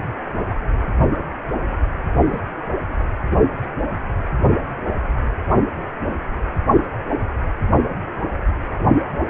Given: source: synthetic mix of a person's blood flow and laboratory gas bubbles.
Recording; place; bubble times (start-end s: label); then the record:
Doppler ultrasound of blood flow; precordium
2.26-2.39 s: bubbles
From the record:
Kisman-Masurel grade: 121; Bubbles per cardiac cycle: 1 to 2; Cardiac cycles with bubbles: 10 to 50%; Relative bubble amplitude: barely perceptible (0.100 to 0.250); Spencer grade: 2 (many but less than half of the cardiac periods contain bubble signals, singularly or in groups); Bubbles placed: only in the low amplitude regions of the cardiac cycle